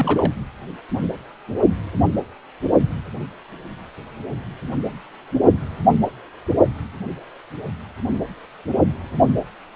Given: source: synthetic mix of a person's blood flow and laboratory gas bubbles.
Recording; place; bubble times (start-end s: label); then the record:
Doppler ultrasound of blood flow; precordium
0.00-0.33 s: bubbles
From the record:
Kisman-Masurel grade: 212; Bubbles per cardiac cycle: several, 3 to 8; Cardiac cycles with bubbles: 1 to 10%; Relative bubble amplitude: moderate (0.250 to 0.450); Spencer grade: 1 (occasional bubble signal discernible with the cardiac motion signal, with majority of cardiac periods free of bubbles); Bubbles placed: anywhere in the cardiac cycle